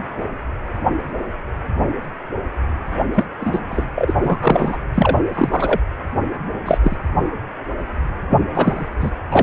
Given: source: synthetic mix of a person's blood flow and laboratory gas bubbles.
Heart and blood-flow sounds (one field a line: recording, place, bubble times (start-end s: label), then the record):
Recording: Doppler ultrasound of blood flow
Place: precordium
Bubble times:
3.14-3.25 s: bubbles
3.40-3.60 s: bubbles
3.71-3.86 s: bubbles
3.95-4.78 s: bubbles
4.94-5.18 s: bubbles
5.33-5.79 s: bubbles
6.66-6.78 s: bubbles
6.82-6.96 s: bubbles
8.29-8.45 s: bubbles
8.54-8.88 s: bubbles
8.99-9.10 s: bubbles
9.30-9.43 s: bubbles
From the record:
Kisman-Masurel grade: 233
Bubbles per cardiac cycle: several, 3 to 8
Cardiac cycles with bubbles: 50 to 99%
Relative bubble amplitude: loud (0.450 to 0.775)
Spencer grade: 3 (all of the cardiac periods contain showers or single bubble signals, but not dominating or overriding the cardiac motion signals)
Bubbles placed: anywhere in the cardiac cycle